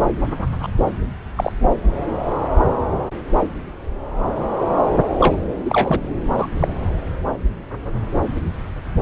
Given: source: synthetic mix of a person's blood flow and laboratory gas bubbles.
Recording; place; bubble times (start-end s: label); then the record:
Doppler ultrasound of blood flow; subclavian vein
0.62-0.68 s: bubbles
1.36-1.52 s: bubbles
5.18-5.37 s: bubbles
5.65-6.00 s: bubbles
6.37-6.50 s: bubbles
6.59-6.68 s: bubbles
From the record:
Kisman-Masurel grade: 223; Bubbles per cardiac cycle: several, 3 to 8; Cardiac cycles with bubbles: 10 to 50%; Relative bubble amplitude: loud (0.450 to 0.775); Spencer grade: 2 (many but less than half of the cardiac periods contain bubble signals, singularly or in groups); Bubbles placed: anywhere in the cardiac cycle